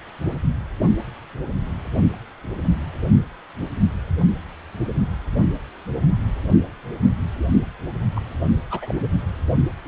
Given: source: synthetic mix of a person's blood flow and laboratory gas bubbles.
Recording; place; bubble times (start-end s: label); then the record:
Doppler ultrasound of blood flow; precordium
8.15-8.21 s: bubbles
8.70-8.95 s: bubbles
From the record:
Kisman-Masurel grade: 121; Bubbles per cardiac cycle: 1 to 2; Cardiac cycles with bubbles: 10 to 50%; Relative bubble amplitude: barely perceptible (0.100 to 0.250); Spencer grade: 2 (many but less than half of the cardiac periods contain bubble signals, singularly or in groups); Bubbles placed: only in the low amplitude regions of the cardiac cycle